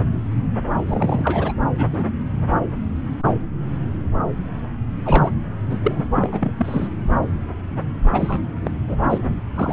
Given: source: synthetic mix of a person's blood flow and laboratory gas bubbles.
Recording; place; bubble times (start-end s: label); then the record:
Doppler ultrasound of blood flow; subclavian vein
0.86-1.53 s: bubbles
1.78-1.86 s: bubbles
1.93-2.04 s: bubbles
5.05-5.31 s: bubbles
5.69-5.79 s: bubbles
5.83-6.03 s: bubbles
6.16-6.52 s: bubbles
6.57-6.88 s: bubbles
8.12-8.42 s: bubbles
8.64-8.71 s: bubbles
8.87-8.97 s: bubbles
9.10-9.37 s: bubbles
9.54-9.73 s: bubbles
From the record:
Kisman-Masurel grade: 222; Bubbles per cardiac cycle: several, 3 to 8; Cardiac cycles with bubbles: 10 to 50%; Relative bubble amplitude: moderate (0.250 to 0.450); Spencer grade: 2 (many but less than half of the cardiac periods contain bubble signals, singularly or in groups); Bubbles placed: anywhere in the cardiac cycle